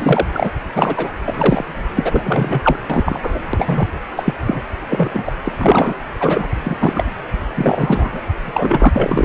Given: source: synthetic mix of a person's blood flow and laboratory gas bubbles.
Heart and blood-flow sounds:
Doppler ultrasound of blood flow; precordium
0.00-0.26 s: bubbles
0.34-0.49 s: bubbles
0.75-1.10 s: bubbles
1.24-1.65 s: bubbles
1.95-2.79 s: bubbles
2.89-3.21 s: bubbles
3.23-3.43 s: bubbles
3.53-3.88 s: bubbles
4.16-4.33 s: bubbles
4.46-4.62 s: bubbles
4.89-5.32 s: bubbles
5.45-5.52 s: bubbles
5.58-5.94 s: bubbles
6.19-6.49 s: bubbles
6.64-7.05 s: bubbles
7.55-8.21 s: bubbles
8.41-8.90 s: bubbles
8.94-9.24 s: bubbles
From the record:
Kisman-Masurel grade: 243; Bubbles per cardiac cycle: several, 3 to 8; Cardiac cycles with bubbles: 100%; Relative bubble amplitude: loud (0.450 to 0.775); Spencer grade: 3 (all of the cardiac periods contain showers or single bubble signals, but not dominating or overriding the cardiac motion signals); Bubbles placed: anywhere in the cardiac cycle

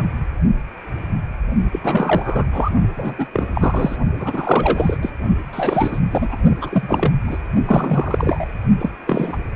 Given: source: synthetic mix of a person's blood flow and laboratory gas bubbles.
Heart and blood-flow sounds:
Doppler ultrasound of blood flow; precordium
0.00-0.04 s: bubbles
1.72-1.79 s: bubbles
1.83-2.49 s: bubbles
2.52-2.71 s: bubbles
2.97-3.13 s: bubbles
3.17-3.27 s: bubbles
3.32-3.48 s: bubbles
3.54-3.98 s: bubbles
4.17-4.98 s: bubbles
5.02-5.12 s: bubbles
5.53-6.00 s: bubbles
6.11-6.37 s: bubbles
6.61-7.13 s: bubbles
7.26-7.38 s: bubbles
7.66-8.46 s: bubbles
8.79-8.91 s: bubbles
9.06-9.37 s: bubbles
From the record:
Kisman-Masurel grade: 333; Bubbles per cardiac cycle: rolling drumbeat, 9 or more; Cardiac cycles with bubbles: 50 to 99%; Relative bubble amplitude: loud (0.450 to 0.775); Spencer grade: 3 (all of the cardiac periods contain showers or single bubble signals, but not dominating or overriding the cardiac motion signals); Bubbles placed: only in the low amplitude regions of the cardiac cycle

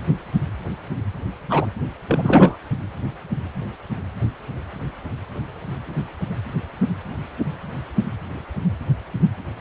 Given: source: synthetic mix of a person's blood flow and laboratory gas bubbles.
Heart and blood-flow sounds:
Doppler ultrasound of blood flow; precordium
1.49-1.67 s: bubbles
2.09-2.57 s: bubbles
From the record:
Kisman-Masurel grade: 213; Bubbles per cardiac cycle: several, 3 to 8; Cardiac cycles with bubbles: 1 to 10%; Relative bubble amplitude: loud (0.450 to 0.775); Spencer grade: 1 (occasional bubble signal discernible with the cardiac motion signal, with majority of cardiac periods free of bubbles); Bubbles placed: anywhere in the cardiac cycle

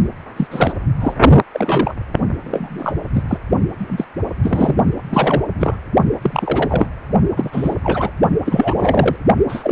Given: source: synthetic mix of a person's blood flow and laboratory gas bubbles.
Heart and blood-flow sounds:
Doppler ultrasound of blood flow; precordium
0.37-0.47 s: bubbles
0.50-0.73 s: bubbles
1.00-1.14 s: bubbles
1.52-1.94 s: bubbles
2.44-2.95 s: bubbles
3.14-3.23 s: bubbles
3.28-3.38 s: bubbles
3.78-4.06 s: bubbles
4.42-4.75 s: bubbles
5.05-5.42 s: bubbles
5.59-5.77 s: bubbles
6.22-6.88 s: bubbles
7.36-7.74 s: bubbles
7.83-8.11 s: bubbles
8.45-9.16 s: bubbles
9.49-9.72 s: bubbles
From the record:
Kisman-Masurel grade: 243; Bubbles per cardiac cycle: several, 3 to 8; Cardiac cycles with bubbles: 100%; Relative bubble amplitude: loud (0.450 to 0.775); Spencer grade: 3 (all of the cardiac periods contain showers or single bubble signals, but not dominating or overriding the cardiac motion signals); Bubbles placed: only in the low amplitude regions of the cardiac cycle

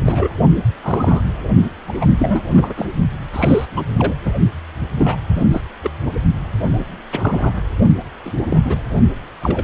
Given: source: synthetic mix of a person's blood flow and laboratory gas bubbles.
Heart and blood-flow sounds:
Doppler ultrasound of blood flow; precordium
0.00-0.29 s: bubbles
0.83-1.22 s: bubbles
1.87-2.06 s: bubbles
2.19-2.44 s: bubbles
2.52-2.73 s: bubbles
2.77-2.85 s: bubbles
3.33-3.66 s: bubbles
3.76-3.85 s: bubbles
3.97-4.15 s: bubbles
4.24-4.31 s: bubbles
4.97-5.17 s: bubbles
5.35-5.61 s: bubbles
5.82-5.90 s: bubbles
6.72-6.83 s: bubbles
7.11-7.53 s: bubbles
8.25-8.33 s: bubbles
8.49-8.61 s: bubbles
8.65-8.77 s: bubbles
9.42-9.64 s: bubbles
From the record:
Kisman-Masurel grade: 242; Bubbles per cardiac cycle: several, 3 to 8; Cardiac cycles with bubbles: 100%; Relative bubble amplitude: moderate (0.250 to 0.450); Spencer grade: 3 (all of the cardiac periods contain showers or single bubble signals, but not dominating or overriding the cardiac motion signals); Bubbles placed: only in the low amplitude regions of the cardiac cycle

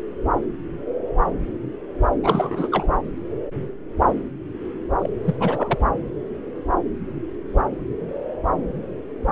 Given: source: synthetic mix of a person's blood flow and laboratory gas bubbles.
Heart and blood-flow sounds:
Doppler ultrasound of blood flow; subclavian vein
2.23-2.69 s: bubbles
2.72-2.88 s: bubbles
5.00-5.09 s: bubbles
5.24-5.35 s: bubbles
5.40-5.78 s: bubbles
From the record:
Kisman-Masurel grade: 222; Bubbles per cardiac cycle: several, 3 to 8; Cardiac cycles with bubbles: 10 to 50%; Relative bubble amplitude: moderate (0.250 to 0.450); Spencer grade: 2 (many but less than half of the cardiac periods contain bubble signals, singularly or in groups); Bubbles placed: anywhere in the cardiac cycle

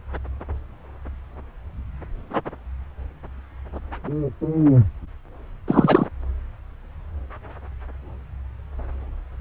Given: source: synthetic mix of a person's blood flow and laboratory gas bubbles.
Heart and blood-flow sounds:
Doppler ultrasound of blood flow; subclavian vein
5.67-6.07 s: bubbles
From the record:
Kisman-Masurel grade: 213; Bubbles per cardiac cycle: several, 3 to 8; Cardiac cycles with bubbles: 1 to 10%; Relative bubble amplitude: loud (0.450 to 0.775); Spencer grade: 1 (occasional bubble signal discernible with the cardiac motion signal, with majority of cardiac periods free of bubbles); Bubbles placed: anywhere in the cardiac cycle

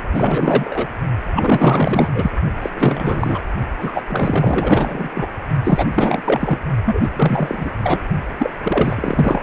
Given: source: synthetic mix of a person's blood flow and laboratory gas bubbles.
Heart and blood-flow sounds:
Doppler ultrasound of blood flow; precordium
0.11-0.88 s: bubbles
1.31-2.09 s: bubbles
2.15-2.31 s: bubbles
2.62-2.70 s: bubbles
2.75-3.42 s: bubbles
3.81-3.92 s: bubbles
3.95-4.02 s: bubbles
4.08-5.10 s: bubbles
5.15-5.28 s: bubbles
5.63-5.87 s: bubbles
5.93-6.21 s: bubbles
6.24-6.59 s: bubbles
6.84-7.70 s: bubbles
7.83-8.01 s: bubbles
8.38-8.50 s: bubbles
8.63-9.42 s: bubbles
From the record:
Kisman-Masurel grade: 444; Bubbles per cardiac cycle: continuous sound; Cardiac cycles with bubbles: 100%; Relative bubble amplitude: maximal (0.775 to 0.999); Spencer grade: 4 (maximum detectable bubble signal sounding continuously throughout systole and diastole of every cardiac period, and overriding the amplitude of the normal cardiac signals); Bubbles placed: only in the low amplitude regions of the cardiac cycle

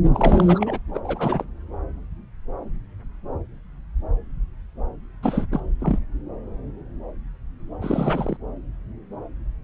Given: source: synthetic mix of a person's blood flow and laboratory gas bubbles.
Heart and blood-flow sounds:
Doppler ultrasound of blood flow; subclavian vein
0.12-0.79 s: bubbles
0.94-1.00 s: bubbles
1.03-1.44 s: bubbles
5.23-5.47 s: bubbles
5.51-5.60 s: bubbles
5.80-5.99 s: bubbles
7.81-8.37 s: bubbles
From the record:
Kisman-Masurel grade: 332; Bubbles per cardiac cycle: rolling drumbeat, 9 or more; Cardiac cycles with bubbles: 50 to 99%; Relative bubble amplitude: moderate (0.250 to 0.450); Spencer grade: 3 (all of the cardiac periods contain showers or single bubble signals, but not dominating or overriding the cardiac motion signals); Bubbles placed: anywhere in the cardiac cycle

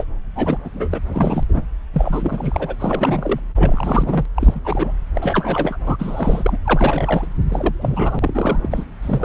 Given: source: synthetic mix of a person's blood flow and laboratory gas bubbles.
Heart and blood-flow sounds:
Doppler ultrasound of blood flow; subclavian vein
0.00-0.05 s: bubbles
0.35-0.58 s: bubbles
0.64-0.70 s: bubbles
0.73-0.89 s: bubbles
0.91-1.01 s: bubbles
1.06-1.44 s: bubbles
1.48-1.62 s: bubbles
1.94-2.75 s: bubbles
2.79-3.40 s: bubbles
3.56-4.25 s: bubbles
4.35-4.60 s: bubbles
4.64-4.93 s: bubbles
5.14-5.76 s: bubbles
5.85-6.58 s: bubbles
6.64-7.28 s: bubbles
7.50-8.85 s: bubbles
9.02-9.25 s: bubbles
From the record:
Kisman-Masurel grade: 343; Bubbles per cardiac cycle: rolling drumbeat, 9 or more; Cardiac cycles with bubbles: 100%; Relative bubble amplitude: loud (0.450 to 0.775); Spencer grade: 3 (all of the cardiac periods contain showers or single bubble signals, but not dominating or overriding the cardiac motion signals); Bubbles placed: anywhere in the cardiac cycle

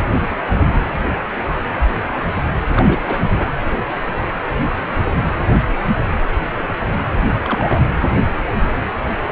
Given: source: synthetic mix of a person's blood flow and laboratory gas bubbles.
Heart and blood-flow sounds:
Doppler ultrasound of blood flow; precordium
2.75-3.01 s: bubbles
3.05-3.28 s: bubbles
3.34-3.46 s: bubbles
7.43-7.82 s: bubbles
From the record:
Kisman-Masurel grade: 222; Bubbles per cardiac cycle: several, 3 to 8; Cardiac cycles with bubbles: 10 to 50%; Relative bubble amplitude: moderate (0.250 to 0.450); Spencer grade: 2 (many but less than half of the cardiac periods contain bubble signals, singularly or in groups); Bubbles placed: anywhere in the cardiac cycle

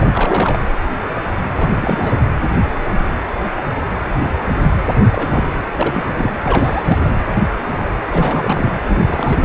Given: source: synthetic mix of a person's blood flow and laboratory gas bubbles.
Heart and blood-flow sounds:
Doppler ultrasound of blood flow; precordium
0.00-0.10 s: bubbles
0.13-0.58 s: bubbles
1.56-2.16 s: bubbles
5.10-5.44 s: bubbles
5.76-6.05 s: bubbles
6.17-6.27 s: bubbles
6.44-7.10 s: bubbles
8.09-8.72 s: bubbles
8.85-9.45 s: bubbles
From the record:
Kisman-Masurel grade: 332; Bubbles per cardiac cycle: rolling drumbeat, 9 or more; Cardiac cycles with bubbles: 50 to 99%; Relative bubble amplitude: moderate (0.250 to 0.450); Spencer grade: 3 (all of the cardiac periods contain showers or single bubble signals, but not dominating or overriding the cardiac motion signals); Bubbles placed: anywhere in the cardiac cycle

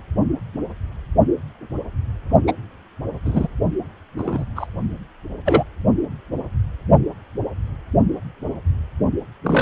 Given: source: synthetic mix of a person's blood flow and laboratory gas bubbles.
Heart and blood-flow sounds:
Doppler ultrasound of blood flow; precordium
0.00-0.02 s: bubbles
2.47-2.53 s: bubbles
3.25-3.48 s: bubbles
4.17-4.45 s: bubbles
4.56-4.67 s: bubbles
5.45-5.63 s: bubbles
9.45-9.62 s: bubbles
From the record:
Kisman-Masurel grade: 123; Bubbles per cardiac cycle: 1 to 2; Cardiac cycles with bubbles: 10 to 50%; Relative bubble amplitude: loud (0.450 to 0.775); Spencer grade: 2 (many but less than half of the cardiac periods contain bubble signals, singularly or in groups); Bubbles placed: only in the low amplitude regions of the cardiac cycle

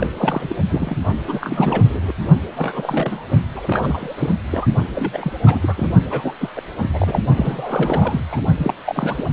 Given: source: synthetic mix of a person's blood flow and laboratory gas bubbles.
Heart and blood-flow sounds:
Doppler ultrasound of blood flow; precordium
0.00-0.09 s: bubbles
0.16-0.55 s: bubbles
0.71-0.97 s: bubbles
1.28-2.12 s: bubbles
2.56-3.27 s: bubbles
3.54-4.14 s: bubbles
4.18-4.36 s: bubbles
4.51-4.67 s: bubbles
4.92-5.33 s: bubbles
5.46-5.58 s: bubbles
5.62-5.90 s: bubbles
6.09-6.34 s: bubbles
6.40-6.50 s: bubbles
6.55-6.61 s: bubbles
6.93-7.20 s: bubbles
7.36-8.20 s: bubbles
8.28-8.43 s: bubbles
8.58-8.74 s: bubbles
8.85-9.24 s: bubbles
From the record:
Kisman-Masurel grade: 342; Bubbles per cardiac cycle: rolling drumbeat, 9 or more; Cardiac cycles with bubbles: 100%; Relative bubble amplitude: moderate (0.250 to 0.450); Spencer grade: 3 (all of the cardiac periods contain showers or single bubble signals, but not dominating or overriding the cardiac motion signals); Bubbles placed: only in the low amplitude regions of the cardiac cycle

